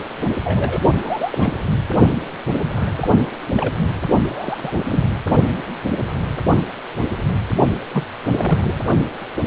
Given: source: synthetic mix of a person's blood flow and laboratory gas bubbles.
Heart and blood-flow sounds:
Doppler ultrasound of blood flow; precordium
0.44-0.82 s: bubbles
0.94-1.53 s: bubbles
2.75-3.11 s: bubbles
3.56-3.74 s: bubbles
4.28-4.72 s: bubbles
4.86-5.04 s: bubbles
7.92-8.04 s: bubbles
8.29-8.79 s: bubbles
From the record:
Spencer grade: 3 (all of the cardiac periods contain showers or single bubble signals, but not dominating or overriding the cardiac motion signals); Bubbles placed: only in the low amplitude regions of the cardiac cycle

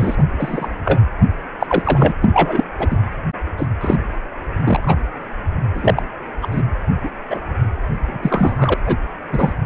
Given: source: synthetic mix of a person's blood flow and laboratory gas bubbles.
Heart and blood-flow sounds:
Doppler ultrasound of blood flow; precordium
0.00-0.25 s: bubbles
0.39-0.80 s: bubbles
0.85-1.00 s: bubbles
1.59-1.67 s: bubbles
1.69-2.14 s: bubbles
2.22-2.64 s: bubbles
2.79-2.98 s: bubbles
3.58-3.67 s: bubbles
3.81-3.96 s: bubbles
4.60-4.96 s: bubbles
5.75-6.03 s: bubbles
6.42-6.47 s: bubbles
6.50-6.62 s: bubbles
7.02-7.08 s: bubbles
7.30-7.40 s: bubbles
8.07-8.18 s: bubbles
8.22-8.74 s: bubbles
8.86-8.96 s: bubbles
9.33-9.54 s: bubbles
From the record:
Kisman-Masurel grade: 243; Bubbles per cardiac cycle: several, 3 to 8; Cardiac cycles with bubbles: 100%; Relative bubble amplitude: loud (0.450 to 0.775); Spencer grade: 3 (all of the cardiac periods contain showers or single bubble signals, but not dominating or overriding the cardiac motion signals); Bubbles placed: anywhere in the cardiac cycle

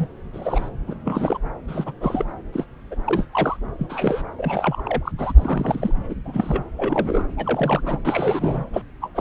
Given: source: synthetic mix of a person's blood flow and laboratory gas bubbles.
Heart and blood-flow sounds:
Doppler ultrasound of blood flow; subclavian vein
0.00-0.07 s: bubbles
0.33-0.69 s: bubbles
0.88-0.94 s: bubbles
1.05-1.38 s: bubbles
1.68-1.92 s: bubbles
2.01-2.25 s: bubbles
2.53-2.65 s: bubbles
2.91-2.95 s: bubbles
3.06-3.25 s: bubbles
3.33-3.57 s: bubbles
3.79-4.22 s: bubbles
4.37-4.82 s: bubbles
4.84-5.12 s: bubbles
5.18-5.32 s: bubbles
5.38-5.92 s: bubbles
6.09-6.14 s: bubbles
6.25-6.63 s: bubbles
6.76-7.27 s: bubbles
7.37-7.80 s: bubbles
7.86-7.99 s: bubbles
8.04-8.64 s: bubbles
8.73-8.81 s: bubbles
9.01-9.10 s: bubbles
9.14-9.21 s: bubbles
From the record:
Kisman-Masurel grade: 242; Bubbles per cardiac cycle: several, 3 to 8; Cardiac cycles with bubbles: 100%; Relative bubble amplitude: moderate (0.250 to 0.450); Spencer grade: 3 (all of the cardiac periods contain showers or single bubble signals, but not dominating or overriding the cardiac motion signals); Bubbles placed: anywhere in the cardiac cycle

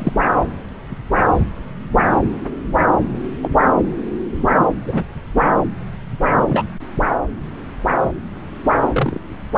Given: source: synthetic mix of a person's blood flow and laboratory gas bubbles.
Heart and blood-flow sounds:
Doppler ultrasound of blood flow; subclavian vein
0.00-0.12 s: bubbles
3.42-3.50 s: bubbles
4.58-4.65 s: bubbles
4.87-5.02 s: bubbles
6.48-6.65 s: bubbles
8.93-9.21 s: bubbles
From the record:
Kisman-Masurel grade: 122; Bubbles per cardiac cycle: 1 to 2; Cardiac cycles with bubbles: 10 to 50%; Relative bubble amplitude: moderate (0.250 to 0.450); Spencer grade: 2 (many but less than half of the cardiac periods contain bubble signals, singularly or in groups); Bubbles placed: anywhere in the cardiac cycle

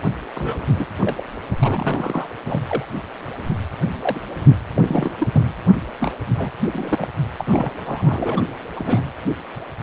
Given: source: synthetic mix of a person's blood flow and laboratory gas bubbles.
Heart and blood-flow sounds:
Doppler ultrasound of blood flow; precordium
0.34-0.85 s: bubbles
1.00-1.21 s: bubbles
1.62-2.27 s: bubbles
2.45-2.62 s: bubbles
2.68-2.85 s: bubbles
2.96-3.02 s: bubbles
4.02-4.20 s: bubbles
4.48-4.57 s: bubbles
4.76-5.11 s: bubbles
5.19-5.43 s: bubbles
6.00-6.13 s: bubbles
6.38-6.53 s: bubbles
6.71-6.96 s: bubbles
6.98-7.08 s: bubbles
7.38-7.71 s: bubbles
7.86-8.50 s: bubbles
8.76-9.04 s: bubbles
From the record:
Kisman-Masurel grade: 232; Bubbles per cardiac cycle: several, 3 to 8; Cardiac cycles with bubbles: 50 to 99%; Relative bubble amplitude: moderate (0.250 to 0.450); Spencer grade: 3 (all of the cardiac periods contain showers or single bubble signals, but not dominating or overriding the cardiac motion signals); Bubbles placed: anywhere in the cardiac cycle

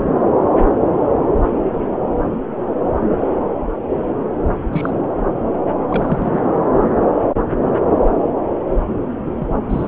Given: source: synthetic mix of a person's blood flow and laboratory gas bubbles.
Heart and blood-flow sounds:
Doppler ultrasound of blood flow; subclavian vein
4.72-4.91 s: bubbles
5.90-6.41 s: bubbles
9.37-9.47 s: bubbles
9.69-9.88 s: bubbles
From the record:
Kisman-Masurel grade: 122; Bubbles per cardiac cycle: 1 to 2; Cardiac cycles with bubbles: 10 to 50%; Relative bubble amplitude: moderate (0.250 to 0.450); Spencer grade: 2 (many but less than half of the cardiac periods contain bubble signals, singularly or in groups); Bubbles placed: anywhere in the cardiac cycle

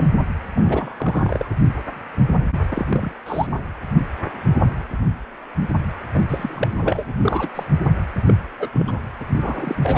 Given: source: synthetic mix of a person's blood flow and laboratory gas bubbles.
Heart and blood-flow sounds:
Doppler ultrasound of blood flow; precordium
0.00-0.09 s: bubbles
0.55-0.94 s: bubbles
0.97-1.44 s: bubbles
2.69-2.85 s: bubbles
2.89-3.12 s: bubbles
3.26-3.46 s: bubbles
6.13-6.21 s: bubbles
6.29-6.73 s: bubbles
6.80-7.05 s: bubbles
7.24-7.48 s: bubbles
7.54-7.64 s: bubbles
8.14-8.39 s: bubbles
8.59-8.69 s: bubbles
8.73-8.99 s: bubbles
9.20-9.25 s: bubbles
9.38-9.75 s: bubbles
9.83-9.98 s: bubbles
From the record:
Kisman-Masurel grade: 232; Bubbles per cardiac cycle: several, 3 to 8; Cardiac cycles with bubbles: 50 to 99%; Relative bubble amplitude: moderate (0.250 to 0.450); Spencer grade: 3 (all of the cardiac periods contain showers or single bubble signals, but not dominating or overriding the cardiac motion signals); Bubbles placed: anywhere in the cardiac cycle

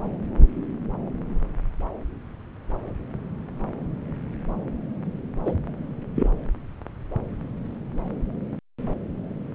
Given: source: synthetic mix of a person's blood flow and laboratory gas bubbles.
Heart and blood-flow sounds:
Doppler ultrasound of blood flow; subclavian vein
5.44-5.54 s: bubbles
6.15-6.29 s: bubbles
From the record:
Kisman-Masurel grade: 112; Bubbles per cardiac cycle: 1 to 2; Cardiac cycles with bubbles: 1 to 10%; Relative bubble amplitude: moderate (0.250 to 0.450); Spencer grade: 1 (occasional bubble signal discernible with the cardiac motion signal, with majority of cardiac periods free of bubbles); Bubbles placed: anywhere in the cardiac cycle

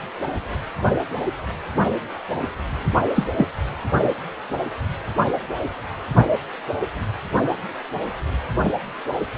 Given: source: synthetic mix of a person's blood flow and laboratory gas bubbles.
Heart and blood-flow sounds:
Doppler ultrasound of blood flow; precordium
3.15-3.24 s: bubbles
3.38-3.47 s: bubbles
From the record:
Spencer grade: 1 (occasional bubble signal discernible with the cardiac motion signal, with majority of cardiac periods free of bubbles); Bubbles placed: only in the low amplitude regions of the cardiac cycle

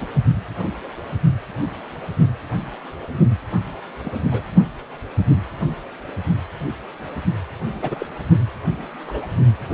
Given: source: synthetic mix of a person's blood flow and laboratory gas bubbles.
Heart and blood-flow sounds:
Doppler ultrasound of blood flow; precordium
0.00-0.07 s: bubbles
4.04-4.11 s: bubbles
4.31-4.47 s: bubbles
7.82-8.06 s: bubbles
9.06-9.27 s: bubbles
From the record:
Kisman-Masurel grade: 122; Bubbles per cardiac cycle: 1 to 2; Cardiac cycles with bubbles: 10 to 50%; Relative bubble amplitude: moderate (0.250 to 0.450); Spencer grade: 2 (many but less than half of the cardiac periods contain bubble signals, singularly or in groups); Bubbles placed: only in the low amplitude regions of the cardiac cycle

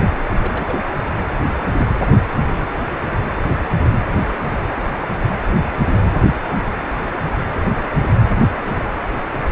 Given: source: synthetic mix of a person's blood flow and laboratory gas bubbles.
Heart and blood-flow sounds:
Doppler ultrasound of blood flow; precordium
0.41-0.81 s: bubbles
From the record:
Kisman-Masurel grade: 221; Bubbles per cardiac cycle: several, 3 to 8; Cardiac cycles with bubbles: 10 to 50%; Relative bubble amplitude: barely perceptible (0.100 to 0.250); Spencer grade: 2 (many but less than half of the cardiac periods contain bubble signals, singularly or in groups); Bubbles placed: anywhere in the cardiac cycle

